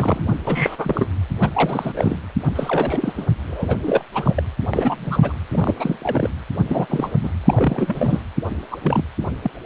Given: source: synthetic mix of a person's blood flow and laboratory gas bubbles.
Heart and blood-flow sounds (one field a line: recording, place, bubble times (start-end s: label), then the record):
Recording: Doppler ultrasound of blood flow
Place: precordium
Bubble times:
0.00-0.22 s: bubbles
0.27-0.33 s: bubbles
0.46-1.07 s: bubbles
1.40-1.50 s: bubbles
1.53-1.93 s: bubbles
1.96-2.20 s: bubbles
2.46-3.13 s: bubbles
3.17-3.25 s: bubbles
3.46-3.79 s: bubbles
3.82-4.04 s: bubbles
4.14-4.43 s: bubbles
4.73-5.18 s: bubbles
5.22-5.33 s: bubbles
5.51-6.30 s: bubbles
6.68-6.86 s: bubbles
6.89-7.13 s: bubbles
7.20-7.30 s: bubbles
7.42-8.21 s: bubbles
8.71-8.78 s: bubbles
8.82-9.04 s: bubbles
9.42-9.51 s: bubbles
From the record:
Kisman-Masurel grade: 342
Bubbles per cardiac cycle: rolling drumbeat, 9 or more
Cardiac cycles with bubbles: 100%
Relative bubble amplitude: moderate (0.250 to 0.450)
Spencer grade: 3 (all of the cardiac periods contain showers or single bubble signals, but not dominating or overriding the cardiac motion signals)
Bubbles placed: anywhere in the cardiac cycle